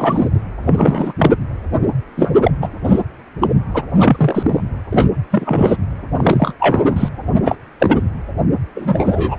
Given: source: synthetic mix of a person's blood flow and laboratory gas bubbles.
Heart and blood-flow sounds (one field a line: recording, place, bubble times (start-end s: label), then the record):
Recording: Doppler ultrasound of blood flow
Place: precordium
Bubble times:
0.00-0.28 s: bubbles
0.66-1.12 s: bubbles
1.18-1.31 s: bubbles
2.17-2.32 s: bubbles
2.42-2.52 s: bubbles
2.62-2.68 s: bubbles
2.83-3.02 s: bubbles
3.41-3.48 s: bubbles
3.74-3.82 s: bubbles
4.00-4.63 s: bubbles
4.91-5.08 s: bubbles
5.31-5.77 s: bubbles
6.17-6.53 s: bubbles
6.59-7.08 s: bubbles
7.43-7.55 s: bubbles
7.79-8.02 s: bubbles
8.76-9.38 s: bubbles
From the record:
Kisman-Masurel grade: 243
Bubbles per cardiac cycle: several, 3 to 8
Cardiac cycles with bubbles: 100%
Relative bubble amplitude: loud (0.450 to 0.775)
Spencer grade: 3 (all of the cardiac periods contain showers or single bubble signals, but not dominating or overriding the cardiac motion signals)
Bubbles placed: anywhere in the cardiac cycle